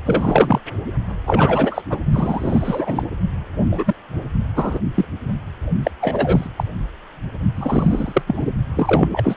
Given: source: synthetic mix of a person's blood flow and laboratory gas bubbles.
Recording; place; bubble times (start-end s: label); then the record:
Doppler ultrasound of blood flow; precordium
0.06-0.61 s: bubbles
1.26-1.82 s: bubbles
1.89-1.98 s: bubbles
2.12-3.03 s: bubbles
3.71-3.96 s: bubbles
4.56-4.79 s: bubbles
4.96-5.05 s: bubbles
5.83-5.91 s: bubbles
6.00-6.48 s: bubbles
6.58-6.64 s: bubbles
7.54-8.22 s: bubbles
8.27-8.49 s: bubbles
8.76-9.08 s: bubbles
9.11-9.36 s: bubbles
From the record:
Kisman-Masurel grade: 233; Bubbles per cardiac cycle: several, 3 to 8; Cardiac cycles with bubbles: 50 to 99%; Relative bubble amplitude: loud (0.450 to 0.775); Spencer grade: 3 (all of the cardiac periods contain showers or single bubble signals, but not dominating or overriding the cardiac motion signals); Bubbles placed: only in the low amplitude regions of the cardiac cycle